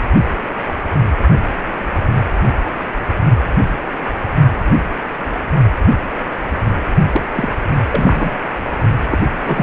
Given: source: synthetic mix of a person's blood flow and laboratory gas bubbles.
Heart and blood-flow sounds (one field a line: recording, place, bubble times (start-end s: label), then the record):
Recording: Doppler ultrasound of blood flow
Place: precordium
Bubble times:
7.13-7.21 s: bubbles
7.35-7.49 s: bubbles
7.91-8.36 s: bubbles
9.11-9.18 s: bubbles
9.45-9.63 s: bubbles
From the record:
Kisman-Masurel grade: 222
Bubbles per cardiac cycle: several, 3 to 8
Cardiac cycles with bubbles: 10 to 50%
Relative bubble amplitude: moderate (0.250 to 0.450)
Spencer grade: 2 (many but less than half of the cardiac periods contain bubble signals, singularly or in groups)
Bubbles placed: only in the low amplitude regions of the cardiac cycle